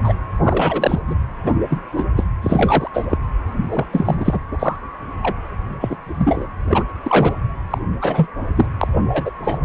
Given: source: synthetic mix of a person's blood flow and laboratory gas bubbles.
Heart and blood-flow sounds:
Doppler ultrasound of blood flow; precordium
0.04-0.14 s: bubbles
0.43-0.99 s: bubbles
1.07-1.16 s: bubbles
1.44-1.53 s: bubbles
1.70-1.78 s: bubbles
1.96-2.05 s: bubbles
2.16-2.25 s: bubbles
2.42-2.89 s: bubbles
2.94-3.18 s: bubbles
3.70-3.85 s: bubbles
3.92-4.39 s: bubbles
4.51-4.76 s: bubbles
5.22-5.35 s: bubbles
5.80-5.98 s: bubbles
6.04-6.47 s: bubbles
6.69-6.83 s: bubbles
7.02-7.36 s: bubbles
7.70-7.78 s: bubbles
8.01-8.27 s: bubbles
8.55-8.66 s: bubbles
8.81-8.88 s: bubbles
9.12-9.31 s: bubbles
9.41-9.59 s: bubbles
From the record:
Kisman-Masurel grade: 243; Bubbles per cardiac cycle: several, 3 to 8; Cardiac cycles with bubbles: 100%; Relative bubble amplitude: loud (0.450 to 0.775); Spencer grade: 3 (all of the cardiac periods contain showers or single bubble signals, but not dominating or overriding the cardiac motion signals); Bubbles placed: anywhere in the cardiac cycle

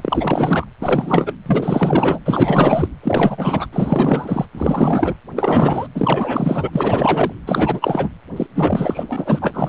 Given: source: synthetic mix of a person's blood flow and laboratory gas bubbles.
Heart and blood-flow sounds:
Doppler ultrasound of blood flow; precordium
0.00-0.66 s: bubbles
0.80-1.34 s: bubbles
1.46-2.19 s: bubbles
2.25-2.88 s: bubbles
3.02-3.67 s: bubbles
3.73-4.46 s: bubbles
4.53-5.15 s: bubbles
5.35-5.88 s: bubbles
5.95-7.33 s: bubbles
7.46-8.09 s: bubbles
8.36-8.46 s: bubbles
8.55-9.69 s: bubbles
From the record:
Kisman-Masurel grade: 444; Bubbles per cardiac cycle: continuous sound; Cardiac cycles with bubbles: 100%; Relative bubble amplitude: maximal (0.775 to 0.999); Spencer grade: 4 (maximum detectable bubble signal sounding continuously throughout systole and diastole of every cardiac period, and overriding the amplitude of the normal cardiac signals); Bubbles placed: anywhere in the cardiac cycle

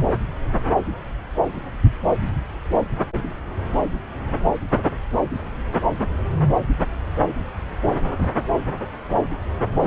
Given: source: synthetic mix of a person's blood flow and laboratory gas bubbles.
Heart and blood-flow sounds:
Doppler ultrasound of blood flow; subclavian vein
no bubbles
From the record:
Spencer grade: 0 (complete lack of bubble signals)

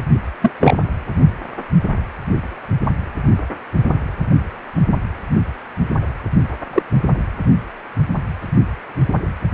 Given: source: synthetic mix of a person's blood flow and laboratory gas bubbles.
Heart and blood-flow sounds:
Doppler ultrasound of blood flow; precordium
0.42-0.53 s: bubbles
0.59-0.78 s: bubbles
6.73-6.83 s: bubbles
From the record:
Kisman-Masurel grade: 123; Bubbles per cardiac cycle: 1 to 2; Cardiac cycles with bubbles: 10 to 50%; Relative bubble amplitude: loud (0.450 to 0.775); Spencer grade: 2 (many but less than half of the cardiac periods contain bubble signals, singularly or in groups); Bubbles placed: anywhere in the cardiac cycle

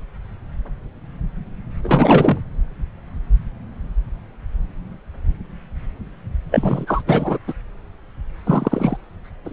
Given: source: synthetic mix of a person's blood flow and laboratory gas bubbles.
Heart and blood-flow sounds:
Doppler ultrasound of blood flow; subclavian vein
1.83-2.41 s: bubbles
6.51-7.03 s: bubbles
7.07-7.39 s: bubbles
7.47-7.54 s: bubbles
8.46-8.97 s: bubbles
9.45-9.53 s: bubbles
From the record:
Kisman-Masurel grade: 223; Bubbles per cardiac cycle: several, 3 to 8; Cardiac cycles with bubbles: 10 to 50%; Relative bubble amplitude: loud (0.450 to 0.775); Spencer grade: 2 (many but less than half of the cardiac periods contain bubble signals, singularly or in groups); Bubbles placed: anywhere in the cardiac cycle

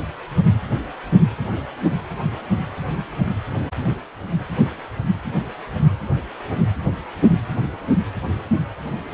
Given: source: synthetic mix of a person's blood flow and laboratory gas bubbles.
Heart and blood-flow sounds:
Doppler ultrasound of blood flow; precordium
no bubbles
From the record:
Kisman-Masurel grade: 000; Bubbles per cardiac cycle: 0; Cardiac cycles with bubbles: 0%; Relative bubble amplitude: no bubbles discernible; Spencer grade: 0 (complete lack of bubble signals)

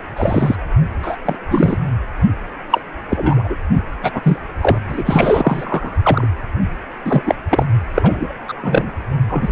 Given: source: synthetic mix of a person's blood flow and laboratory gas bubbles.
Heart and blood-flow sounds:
Doppler ultrasound of blood flow; precordium
0.17-0.56 s: bubbles
1.02-1.18 s: bubbles
1.25-1.35 s: bubbles
1.50-1.77 s: bubbles
2.70-2.81 s: bubbles
3.09-3.56 s: bubbles
4.02-4.11 s: bubbles
4.14-4.38 s: bubbles
4.61-4.78 s: bubbles
4.88-5.02 s: bubbles
5.05-6.27 s: bubbles
7.05-7.22 s: bubbles
7.25-7.35 s: bubbles
7.50-7.66 s: bubbles
7.95-8.33 s: bubbles
8.48-8.53 s: bubbles
8.62-8.92 s: bubbles
9.29-9.52 s: bubbles
From the record:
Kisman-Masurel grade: 243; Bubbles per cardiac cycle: several, 3 to 8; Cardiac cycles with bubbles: 100%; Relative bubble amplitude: loud (0.450 to 0.775); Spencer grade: 3 (all of the cardiac periods contain showers or single bubble signals, but not dominating or overriding the cardiac motion signals); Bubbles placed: anywhere in the cardiac cycle

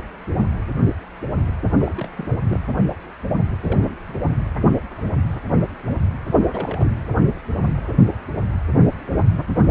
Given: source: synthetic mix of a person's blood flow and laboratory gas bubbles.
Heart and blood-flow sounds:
Doppler ultrasound of blood flow; precordium
1.71-2.29 s: bubbles
2.47-2.60 s: bubbles
3.63-3.96 s: bubbles
4.07-4.23 s: bubbles
6.50-6.92 s: bubbles
From the record:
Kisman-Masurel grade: 221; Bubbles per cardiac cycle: several, 3 to 8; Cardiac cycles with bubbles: 10 to 50%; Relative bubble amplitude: barely perceptible (0.100 to 0.250); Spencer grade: 2 (many but less than half of the cardiac periods contain bubble signals, singularly or in groups); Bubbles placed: anywhere in the cardiac cycle

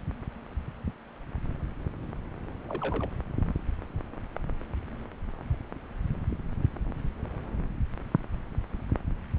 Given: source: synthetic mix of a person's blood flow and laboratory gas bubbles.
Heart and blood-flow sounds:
Doppler ultrasound of blood flow; subclavian vein
2.68-3.08 s: bubbles
From the record:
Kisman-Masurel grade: 111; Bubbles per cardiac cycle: 1 to 2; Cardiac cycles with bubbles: 1 to 10%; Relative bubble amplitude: barely perceptible (0.100 to 0.250); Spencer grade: 1 (occasional bubble signal discernible with the cardiac motion signal, with majority of cardiac periods free of bubbles); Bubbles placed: anywhere in the cardiac cycle

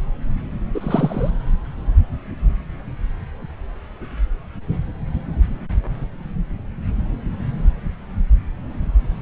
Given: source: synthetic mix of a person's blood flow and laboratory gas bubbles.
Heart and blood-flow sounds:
Doppler ultrasound of blood flow; subclavian vein
0.74-1.30 s: bubbles
From the record:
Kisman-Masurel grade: 213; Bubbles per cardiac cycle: several, 3 to 8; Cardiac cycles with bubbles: 1 to 10%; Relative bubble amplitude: loud (0.450 to 0.775); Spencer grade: 1 (occasional bubble signal discernible with the cardiac motion signal, with majority of cardiac periods free of bubbles); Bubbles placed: anywhere in the cardiac cycle

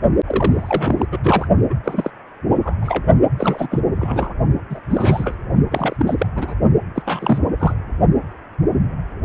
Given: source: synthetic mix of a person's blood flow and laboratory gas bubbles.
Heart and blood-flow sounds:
Doppler ultrasound of blood flow; precordium
0.27-1.05 s: bubbles
1.11-1.19 s: bubbles
1.23-1.48 s: bubbles
1.69-1.75 s: bubbles
1.84-2.10 s: bubbles
2.54-2.77 s: bubbles
2.81-3.06 s: bubbles
3.38-3.68 s: bubbles
3.70-3.80 s: bubbles
3.96-4.35 s: bubbles
4.70-4.79 s: bubbles
4.90-5.35 s: bubbles
5.71-5.96 s: bubbles
5.98-6.14 s: bubbles
6.18-6.27 s: bubbles
6.35-6.54 s: bubbles
6.96-7.02 s: bubbles
7.06-7.39 s: bubbles
7.58-7.74 s: bubbles
From the record:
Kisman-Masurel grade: 332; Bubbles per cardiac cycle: rolling drumbeat, 9 or more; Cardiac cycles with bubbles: 50 to 99%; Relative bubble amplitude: moderate (0.250 to 0.450); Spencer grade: 3 (all of the cardiac periods contain showers or single bubble signals, but not dominating or overriding the cardiac motion signals); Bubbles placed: only in the low amplitude regions of the cardiac cycle

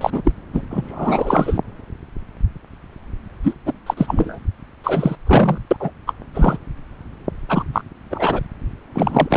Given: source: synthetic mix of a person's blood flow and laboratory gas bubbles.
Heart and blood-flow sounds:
Doppler ultrasound of blood flow; subclavian vein
0.00-0.33 s: bubbles
0.53-0.62 s: bubbles
0.70-1.60 s: bubbles
3.44-3.56 s: bubbles
3.65-3.74 s: bubbles
3.86-3.94 s: bubbles
3.97-4.38 s: bubbles
4.83-5.16 s: bubbles
5.27-5.58 s: bubbles
5.71-5.77 s: bubbles
5.80-5.91 s: bubbles
6.07-6.13 s: bubbles
6.34-6.58 s: bubbles
7.49-7.64 s: bubbles
7.73-7.82 s: bubbles
8.10-8.41 s: bubbles
8.95-9.37 s: bubbles
From the record:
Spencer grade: 3 (all of the cardiac periods contain showers or single bubble signals, but not dominating or overriding the cardiac motion signals); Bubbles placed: anywhere in the cardiac cycle

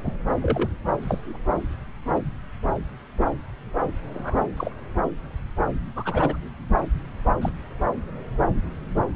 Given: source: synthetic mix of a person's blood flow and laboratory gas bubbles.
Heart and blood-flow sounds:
Doppler ultrasound of blood flow; subclavian vein
0.03-0.14 s: bubbles
0.42-0.70 s: bubbles
1.01-1.38 s: bubbles
2.15-2.21 s: bubbles
4.13-4.40 s: bubbles
4.57-4.75 s: bubbles
5.96-6.37 s: bubbles
7.42-7.50 s: bubbles
From the record:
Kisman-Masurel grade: 121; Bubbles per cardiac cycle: 1 to 2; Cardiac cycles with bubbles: 10 to 50%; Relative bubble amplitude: barely perceptible (0.100 to 0.250); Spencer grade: 2 (many but less than half of the cardiac periods contain bubble signals, singularly or in groups); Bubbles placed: anywhere in the cardiac cycle

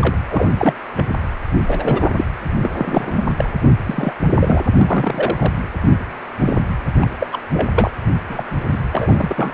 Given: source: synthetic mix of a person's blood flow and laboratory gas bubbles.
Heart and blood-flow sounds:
Doppler ultrasound of blood flow; precordium
0.01-0.16 s: bubbles
0.27-0.74 s: bubbles
0.96-1.06 s: bubbles
1.67-2.12 s: bubbles
2.16-2.24 s: bubbles
2.63-2.71 s: bubbles
2.78-3.26 s: bubbles
3.38-3.50 s: bubbles
3.85-4.13 s: bubbles
4.39-4.64 s: bubbles
4.77-5.52 s: bubbles
6.40-6.58 s: bubbles
7.00-7.07 s: bubbles
7.19-7.27 s: bubbles
7.31-7.39 s: bubbles
7.52-7.68 s: bubbles
7.75-7.90 s: bubbles
8.29-8.44 s: bubbles
8.71-8.78 s: bubbles
8.92-9.54 s: bubbles
From the record:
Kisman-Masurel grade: 242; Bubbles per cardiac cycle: several, 3 to 8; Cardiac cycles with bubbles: 100%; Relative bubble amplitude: moderate (0.250 to 0.450); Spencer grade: 3 (all of the cardiac periods contain showers or single bubble signals, but not dominating or overriding the cardiac motion signals); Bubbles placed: anywhere in the cardiac cycle

